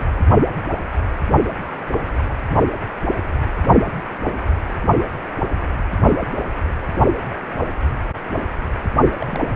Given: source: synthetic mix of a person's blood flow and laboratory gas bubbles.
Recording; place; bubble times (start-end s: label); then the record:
Doppler ultrasound of blood flow; precordium
9.21-9.52 s: bubbles
From the record:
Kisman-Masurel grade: 211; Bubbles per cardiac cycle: several, 3 to 8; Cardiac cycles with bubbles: 1 to 10%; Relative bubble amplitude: barely perceptible (0.100 to 0.250); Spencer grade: 1 (occasional bubble signal discernible with the cardiac motion signal, with majority of cardiac periods free of bubbles); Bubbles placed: only in the low amplitude regions of the cardiac cycle